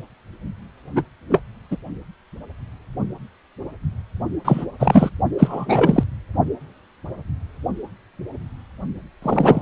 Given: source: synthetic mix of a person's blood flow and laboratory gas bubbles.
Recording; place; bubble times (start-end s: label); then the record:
Doppler ultrasound of blood flow; precordium
0.95-1.02 s: bubbles
1.29-1.42 s: bubbles
1.71-1.77 s: bubbles
4.45-4.65 s: bubbles
4.79-5.10 s: bubbles
5.38-6.04 s: bubbles
9.22-9.62 s: bubbles
From the record:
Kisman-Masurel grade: 233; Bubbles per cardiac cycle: several, 3 to 8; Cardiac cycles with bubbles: 50 to 99%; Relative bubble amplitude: loud (0.450 to 0.775); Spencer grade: 3 (all of the cardiac periods contain showers or single bubble signals, but not dominating or overriding the cardiac motion signals); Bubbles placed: only in the low amplitude regions of the cardiac cycle